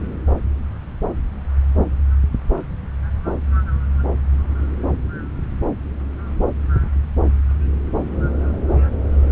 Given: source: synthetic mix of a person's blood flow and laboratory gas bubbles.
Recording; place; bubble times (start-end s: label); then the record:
Doppler ultrasound of blood flow; subclavian vein
no bubbles
From the record:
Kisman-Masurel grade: 000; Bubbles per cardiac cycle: 0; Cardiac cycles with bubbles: 0%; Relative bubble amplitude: no bubbles discernible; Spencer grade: 0 (complete lack of bubble signals)